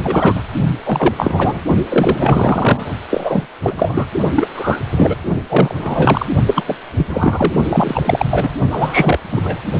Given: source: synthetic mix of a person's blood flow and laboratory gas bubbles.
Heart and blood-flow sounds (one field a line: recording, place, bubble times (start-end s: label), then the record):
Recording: Doppler ultrasound of blood flow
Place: precordium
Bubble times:
0.00-0.42 s: bubbles
0.85-1.60 s: bubbles
1.89-2.89 s: bubbles
3.10-3.46 s: bubbles
3.61-4.05 s: bubbles
4.35-4.48 s: bubbles
4.55-4.79 s: bubbles
4.89-5.17 s: bubbles
5.49-6.26 s: bubbles
6.46-6.62 s: bubbles
6.66-6.76 s: bubbles
6.98-7.54 s: bubbles
7.64-8.02 s: bubbles
8.05-8.26 s: bubbles
8.30-8.51 s: bubbles
8.70-9.19 s: bubbles
9.29-9.63 s: bubbles
From the record:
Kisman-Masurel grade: 343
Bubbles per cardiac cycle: rolling drumbeat, 9 or more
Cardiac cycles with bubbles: 100%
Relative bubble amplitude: loud (0.450 to 0.775)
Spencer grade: 3 (all of the cardiac periods contain showers or single bubble signals, but not dominating or overriding the cardiac motion signals)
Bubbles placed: only in the low amplitude regions of the cardiac cycle